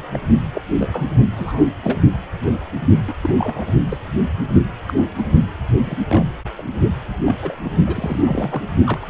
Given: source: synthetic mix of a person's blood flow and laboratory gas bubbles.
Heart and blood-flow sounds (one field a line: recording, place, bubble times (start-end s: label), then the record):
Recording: Doppler ultrasound of blood flow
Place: precordium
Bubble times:
0.13-0.20 s: bubbles
0.54-0.61 s: bubbles
0.79-0.88 s: bubbles
0.93-1.04 s: bubbles
1.36-1.64 s: bubbles
1.84-2.00 s: bubbles
3.07-3.14 s: bubbles
3.23-3.34 s: bubbles
3.39-3.73 s: bubbles
3.89-3.97 s: bubbles
4.88-4.94 s: bubbles
4.97-5.07 s: bubbles
5.17-5.22 s: bubbles
5.82-5.96 s: bubbles
6.09-6.24 s: bubbles
6.58-6.62 s: bubbles
7.26-7.36 s: bubbles
7.42-7.59 s: bubbles
7.64-7.70 s: bubbles
7.87-8.62 s: bubbles
8.84-8.99 s: bubbles
9.02-9.10 s: bubbles
From the record:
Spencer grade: 3 (all of the cardiac periods contain showers or single bubble signals, but not dominating or overriding the cardiac motion signals)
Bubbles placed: only in the low amplitude regions of the cardiac cycle